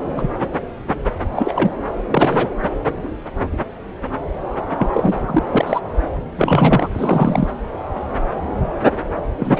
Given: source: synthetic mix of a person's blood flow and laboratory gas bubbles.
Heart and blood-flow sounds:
Doppler ultrasound of blood flow; subclavian vein
0.15-0.30 s: bubbles
1.33-1.71 s: bubbles
2.11-2.50 s: bubbles
4.78-5.15 s: bubbles
5.27-5.43 s: bubbles
5.51-5.81 s: bubbles
6.37-6.88 s: bubbles
6.92-7.48 s: bubbles
9.39-9.59 s: bubbles
From the record:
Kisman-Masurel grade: 223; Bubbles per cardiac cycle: several, 3 to 8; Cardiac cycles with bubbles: 10 to 50%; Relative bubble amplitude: loud (0.450 to 0.775); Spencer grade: 2 (many but less than half of the cardiac periods contain bubble signals, singularly or in groups); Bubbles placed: anywhere in the cardiac cycle

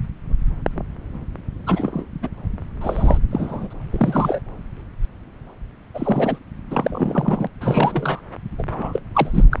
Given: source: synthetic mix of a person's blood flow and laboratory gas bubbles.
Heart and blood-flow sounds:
Doppler ultrasound of blood flow; subclavian vein
1.67-2.05 s: bubbles
2.22-2.29 s: bubbles
2.81-3.17 s: bubbles
3.30-3.67 s: bubbles
3.70-3.73 s: bubbles
3.91-4.41 s: bubbles
5.94-6.38 s: bubbles
6.71-7.47 s: bubbles
7.60-8.20 s: bubbles
8.58-8.62 s: bubbles
8.71-9.00 s: bubbles
9.14-9.44 s: bubbles
9.51-9.59 s: bubbles
From the record:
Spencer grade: 3 (all of the cardiac periods contain showers or single bubble signals, but not dominating or overriding the cardiac motion signals); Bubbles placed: anywhere in the cardiac cycle

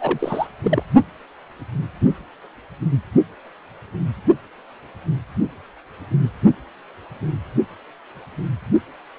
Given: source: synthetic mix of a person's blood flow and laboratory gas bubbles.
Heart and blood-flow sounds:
Doppler ultrasound of blood flow; precordium
0.00-0.47 s: bubbles
0.62-0.84 s: bubbles
From the record:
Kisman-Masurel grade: 212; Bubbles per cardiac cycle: several, 3 to 8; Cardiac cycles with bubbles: 1 to 10%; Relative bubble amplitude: moderate (0.250 to 0.450); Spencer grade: 1 (occasional bubble signal discernible with the cardiac motion signal, with majority of cardiac periods free of bubbles); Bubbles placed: only in the low amplitude regions of the cardiac cycle

